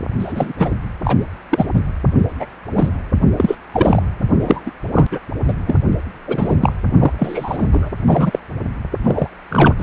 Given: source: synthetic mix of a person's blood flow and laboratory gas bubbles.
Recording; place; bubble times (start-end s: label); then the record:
Doppler ultrasound of blood flow; precordium
0.18-0.53 s: bubbles
0.58-0.74 s: bubbles
1.04-1.17 s: bubbles
1.50-1.66 s: bubbles
1.75-1.81 s: bubbles
2.40-2.46 s: bubbles
2.73-2.88 s: bubbles
3.36-3.55 s: bubbles
3.72-4.02 s: bubbles
4.41-4.62 s: bubbles
4.66-4.71 s: bubbles
4.93-5.07 s: bubbles
5.11-5.21 s: bubbles
5.47-5.54 s: bubbles
5.66-5.81 s: bubbles
6.27-6.57 s: bubbles
6.60-6.72 s: bubbles
6.94-7.12 s: bubbles
7.18-7.67 s: bubbles
7.71-7.89 s: bubbles
8.06-8.39 s: bubbles
9.03-9.29 s: bubbles
9.50-9.74 s: bubbles
9.78-9.83 s: bubbles
From the record:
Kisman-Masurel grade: 243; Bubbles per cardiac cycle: several, 3 to 8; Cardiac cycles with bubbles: 100%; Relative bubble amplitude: loud (0.450 to 0.775); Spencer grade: 3 (all of the cardiac periods contain showers or single bubble signals, but not dominating or overriding the cardiac motion signals); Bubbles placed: anywhere in the cardiac cycle